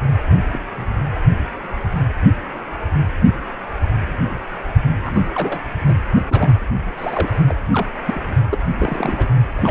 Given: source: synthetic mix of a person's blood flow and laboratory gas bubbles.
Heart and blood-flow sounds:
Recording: Doppler ultrasound of blood flow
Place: precordium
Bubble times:
0.34-0.42 s: bubbles
0.52-0.61 s: bubbles
0.78-0.86 s: bubbles
5.04-5.29 s: bubbles
5.35-5.60 s: bubbles
5.87-5.95 s: bubbles
6.30-6.54 s: bubbles
6.96-7.42 s: bubbles
7.49-7.56 s: bubbles
7.73-7.87 s: bubbles
8.05-8.38 s: bubbles
8.50-8.57 s: bubbles
8.79-9.27 s: bubbles
9.56-9.71 s: bubbles
From the record:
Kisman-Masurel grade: 222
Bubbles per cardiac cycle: several, 3 to 8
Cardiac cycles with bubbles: 10 to 50%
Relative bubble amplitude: moderate (0.250 to 0.450)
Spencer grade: 2 (many but less than half of the cardiac periods contain bubble signals, singularly or in groups)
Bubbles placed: anywhere in the cardiac cycle

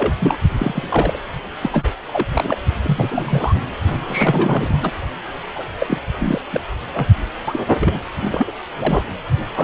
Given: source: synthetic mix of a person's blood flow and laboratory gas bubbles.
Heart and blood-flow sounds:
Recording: Doppler ultrasound of blood flow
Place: precordium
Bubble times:
0.00-0.14 s: bubbles
0.18-0.38 s: bubbles
0.59-1.19 s: bubbles
1.62-1.70 s: bubbles
1.72-1.90 s: bubbles
2.07-2.26 s: bubbles
2.33-2.58 s: bubbles
2.83-3.56 s: bubbles
3.87-4.92 s: bubbles
5.56-5.64 s: bubbles
5.79-5.87 s: bubbles
5.89-5.98 s: bubbles
6.20-6.42 s: bubbles
6.52-6.61 s: bubbles
6.94-7.07 s: bubbles
7.47-7.59 s: bubbles
7.79-7.99 s: bubbles
8.21-8.52 s: bubbles
8.79-9.07 s: bubbles
9.54-9.64 s: bubbles
From the record:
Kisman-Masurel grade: 332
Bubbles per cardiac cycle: rolling drumbeat, 9 or more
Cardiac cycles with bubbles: 50 to 99%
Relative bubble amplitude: moderate (0.250 to 0.450)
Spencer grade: 3 (all of the cardiac periods contain showers or single bubble signals, but not dominating or overriding the cardiac motion signals)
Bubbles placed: anywhere in the cardiac cycle

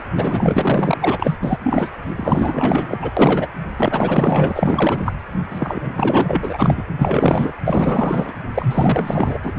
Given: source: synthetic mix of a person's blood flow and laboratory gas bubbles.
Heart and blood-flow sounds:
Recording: Doppler ultrasound of blood flow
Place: precordium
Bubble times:
0.00-0.03 s: bubbles
0.17-1.38 s: bubbles
1.41-1.58 s: bubbles
1.64-1.90 s: bubbles
2.17-2.98 s: bubbles
3.02-3.10 s: bubbles
3.17-3.48 s: bubbles
3.76-5.13 s: bubbles
5.50-6.82 s: bubbles
6.98-7.53 s: bubbles
7.64-8.33 s: bubbles
8.54-9.38 s: bubbles
9.42-9.54 s: bubbles
From the record:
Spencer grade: 4 (maximum detectable bubble signal sounding continuously throughout systole and diastole of every cardiac period, and overriding the amplitude of the normal cardiac signals)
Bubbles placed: anywhere in the cardiac cycle

